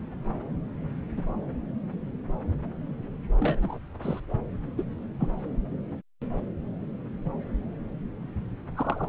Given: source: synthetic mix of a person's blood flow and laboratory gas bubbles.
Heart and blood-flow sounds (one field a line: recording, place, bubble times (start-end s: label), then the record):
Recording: Doppler ultrasound of blood flow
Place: subclavian vein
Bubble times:
1.17-1.23 s: bubbles
3.40-3.79 s: bubbles
4.02-4.20 s: bubbles
4.78-4.83 s: bubbles
5.20-5.29 s: bubbles
7.25-7.30 s: bubbles
8.75-9.09 s: bubbles
From the record:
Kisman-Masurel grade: 122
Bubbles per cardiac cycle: 1 to 2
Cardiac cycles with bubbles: 10 to 50%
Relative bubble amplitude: moderate (0.250 to 0.450)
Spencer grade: 2 (many but less than half of the cardiac periods contain bubble signals, singularly or in groups)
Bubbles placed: anywhere in the cardiac cycle